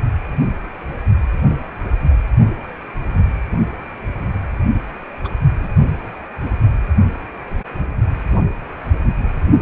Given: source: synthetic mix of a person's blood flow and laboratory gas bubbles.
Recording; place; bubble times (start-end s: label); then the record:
Doppler ultrasound of blood flow; precordium
5.24-5.29 s: bubbles
5.60-5.68 s: bubbles
From the record:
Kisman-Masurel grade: 112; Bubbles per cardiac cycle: 1 to 2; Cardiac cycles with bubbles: 1 to 10%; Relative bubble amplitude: moderate (0.250 to 0.450); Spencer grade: 1 (occasional bubble signal discernible with the cardiac motion signal, with majority of cardiac periods free of bubbles); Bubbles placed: only in the low amplitude regions of the cardiac cycle